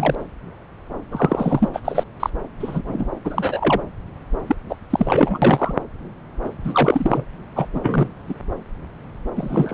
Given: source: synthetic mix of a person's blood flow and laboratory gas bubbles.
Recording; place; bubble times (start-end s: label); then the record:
Doppler ultrasound of blood flow; subclavian vein
0.00-0.15 s: bubbles
1.11-1.69 s: bubbles
1.74-1.80 s: bubbles
1.85-2.04 s: bubbles
2.19-2.30 s: bubbles
2.60-3.10 s: bubbles
3.24-3.81 s: bubbles
4.47-4.55 s: bubbles
4.69-4.76 s: bubbles
4.90-5.39 s: bubbles
5.42-5.74 s: bubbles
6.44-6.49 s: bubbles
6.63-7.24 s: bubbles
7.55-7.68 s: bubbles
7.74-8.09 s: bubbles
8.27-8.34 s: bubbles
9.36-9.74 s: bubbles
From the record:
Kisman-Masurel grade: 233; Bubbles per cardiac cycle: several, 3 to 8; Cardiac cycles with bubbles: 50 to 99%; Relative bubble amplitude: loud (0.450 to 0.775); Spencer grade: 3 (all of the cardiac periods contain showers or single bubble signals, but not dominating or overriding the cardiac motion signals); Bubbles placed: anywhere in the cardiac cycle